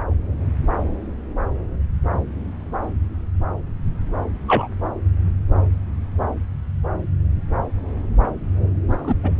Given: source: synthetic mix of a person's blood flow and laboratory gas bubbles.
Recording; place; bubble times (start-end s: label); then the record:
Doppler ultrasound of blood flow; subclavian vein
4.47-4.67 s: bubbles
8.90-9.17 s: bubbles
9.24-9.31 s: bubbles
From the record:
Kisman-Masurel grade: 122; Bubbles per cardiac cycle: 1 to 2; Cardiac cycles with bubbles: 10 to 50%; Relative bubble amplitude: moderate (0.250 to 0.450); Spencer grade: 2 (many but less than half of the cardiac periods contain bubble signals, singularly or in groups); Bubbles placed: anywhere in the cardiac cycle